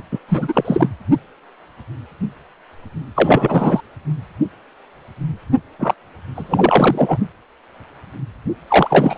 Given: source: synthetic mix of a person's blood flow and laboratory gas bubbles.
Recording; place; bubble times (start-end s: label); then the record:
Doppler ultrasound of blood flow; precordium
0.11-0.19 s: bubbles
0.28-0.88 s: bubbles
3.15-3.80 s: bubbles
5.79-5.95 s: bubbles
6.34-7.17 s: bubbles
8.67-9.18 s: bubbles
From the record:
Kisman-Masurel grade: 333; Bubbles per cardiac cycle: rolling drumbeat, 9 or more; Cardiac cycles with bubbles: 50 to 99%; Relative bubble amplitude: loud (0.450 to 0.775); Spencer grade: 3 (all of the cardiac periods contain showers or single bubble signals, but not dominating or overriding the cardiac motion signals); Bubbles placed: only in the low amplitude regions of the cardiac cycle